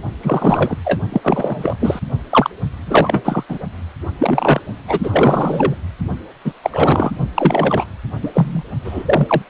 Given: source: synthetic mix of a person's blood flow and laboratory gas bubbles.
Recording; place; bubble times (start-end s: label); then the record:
Doppler ultrasound of blood flow; precordium
0.23-0.77 s: bubbles
0.85-1.00 s: bubbles
1.12-1.77 s: bubbles
1.81-2.00 s: bubbles
2.29-2.50 s: bubbles
2.86-3.44 s: bubbles
3.48-3.58 s: bubbles
4.19-4.61 s: bubbles
4.88-5.75 s: bubbles
6.44-6.53 s: bubbles
6.63-7.11 s: bubbles
7.34-7.86 s: bubbles
8.22-8.63 s: bubbles
8.84-9.42 s: bubbles
From the record:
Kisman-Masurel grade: 333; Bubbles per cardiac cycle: rolling drumbeat, 9 or more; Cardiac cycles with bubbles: 50 to 99%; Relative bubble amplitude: loud (0.450 to 0.775); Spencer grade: 3 (all of the cardiac periods contain showers or single bubble signals, but not dominating or overriding the cardiac motion signals); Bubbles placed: only in the low amplitude regions of the cardiac cycle